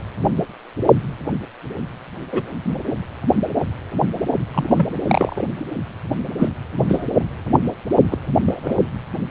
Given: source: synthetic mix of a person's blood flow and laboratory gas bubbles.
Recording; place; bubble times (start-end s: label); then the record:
Doppler ultrasound of blood flow; precordium
2.32-2.42 s: bubbles
4.54-4.87 s: bubbles
5.07-5.46 s: bubbles
6.38-6.48 s: bubbles
6.89-7.07 s: bubbles
7.53-7.60 s: bubbles
8.11-8.18 s: bubbles
8.46-8.75 s: bubbles
From the record:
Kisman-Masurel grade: 123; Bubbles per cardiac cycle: 1 to 2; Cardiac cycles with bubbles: 10 to 50%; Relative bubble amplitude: loud (0.450 to 0.775); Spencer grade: 2 (many but less than half of the cardiac periods contain bubble signals, singularly or in groups); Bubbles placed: anywhere in the cardiac cycle